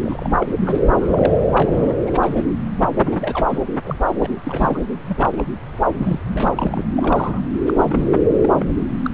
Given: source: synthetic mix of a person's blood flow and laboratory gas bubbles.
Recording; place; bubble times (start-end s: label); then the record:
Doppler ultrasound of blood flow; subclavian vein
0.03-0.30 s: bubbles
0.40-0.46 s: bubbles
0.65-0.79 s: bubbles
0.91-1.38 s: bubbles
1.54-1.94 s: bubbles
2.06-2.46 s: bubbles
3.03-3.58 s: bubbles
3.85-3.96 s: bubbles
4.20-4.26 s: bubbles
4.43-4.80 s: bubbles
5.08-5.45 s: bubbles
5.72-5.76 s: bubbles
5.93-6.19 s: bubbles
6.31-6.87 s: bubbles
6.96-7.51 s: bubbles
7.66-7.74 s: bubbles
7.77-8.18 s: bubbles
8.41-8.51 s: bubbles
8.54-8.66 s: bubbles
9.03-9.11 s: bubbles
From the record:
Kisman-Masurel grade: 232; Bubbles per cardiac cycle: several, 3 to 8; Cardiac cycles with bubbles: 50 to 99%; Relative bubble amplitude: moderate (0.250 to 0.450); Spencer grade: 3 (all of the cardiac periods contain showers or single bubble signals, but not dominating or overriding the cardiac motion signals); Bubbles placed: anywhere in the cardiac cycle